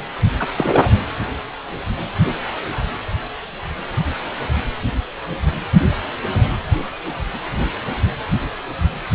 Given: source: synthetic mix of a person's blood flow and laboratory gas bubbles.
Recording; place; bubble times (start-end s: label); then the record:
Doppler ultrasound of blood flow; precordium
0.39-0.47 s: bubbles
0.56-0.91 s: bubbles
From the record:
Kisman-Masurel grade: 212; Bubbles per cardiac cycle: several, 3 to 8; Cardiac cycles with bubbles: 1 to 10%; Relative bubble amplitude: moderate (0.250 to 0.450); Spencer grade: 1 (occasional bubble signal discernible with the cardiac motion signal, with majority of cardiac periods free of bubbles); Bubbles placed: anywhere in the cardiac cycle